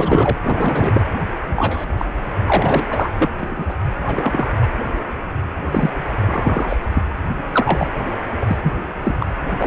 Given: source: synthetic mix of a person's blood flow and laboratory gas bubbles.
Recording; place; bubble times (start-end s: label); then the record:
Doppler ultrasound of blood flow; precordium
0.00-0.36 s: bubbles
0.42-1.02 s: bubbles
1.47-1.88 s: bubbles
1.97-2.05 s: bubbles
2.45-3.29 s: bubbles
3.40-3.65 s: bubbles
3.68-3.73 s: bubbles
4.01-4.50 s: bubbles
4.62-4.67 s: bubbles
5.72-5.90 s: bubbles
6.20-6.77 s: bubbles
6.93-7.02 s: bubbles
7.27-7.35 s: bubbles
7.52-7.89 s: bubbles
8.41-8.57 s: bubbles
8.62-8.72 s: bubbles
9.02-9.26 s: bubbles
9.61-9.67 s: bubbles
From the record:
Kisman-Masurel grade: 233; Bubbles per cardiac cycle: several, 3 to 8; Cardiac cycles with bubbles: 50 to 99%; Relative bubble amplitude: loud (0.450 to 0.775); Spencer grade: 3 (all of the cardiac periods contain showers or single bubble signals, but not dominating or overriding the cardiac motion signals); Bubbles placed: anywhere in the cardiac cycle